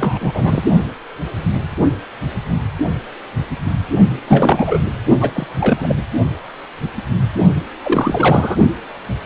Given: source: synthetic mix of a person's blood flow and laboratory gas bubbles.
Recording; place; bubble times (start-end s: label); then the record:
Doppler ultrasound of blood flow; precordium
0.00-0.62 s: bubbles
4.27-4.79 s: bubbles
5.21-5.30 s: bubbles
5.34-5.46 s: bubbles
5.59-6.02 s: bubbles
7.83-8.56 s: bubbles
From the record:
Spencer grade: 3 (all of the cardiac periods contain showers or single bubble signals, but not dominating or overriding the cardiac motion signals); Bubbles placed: only in the low amplitude regions of the cardiac cycle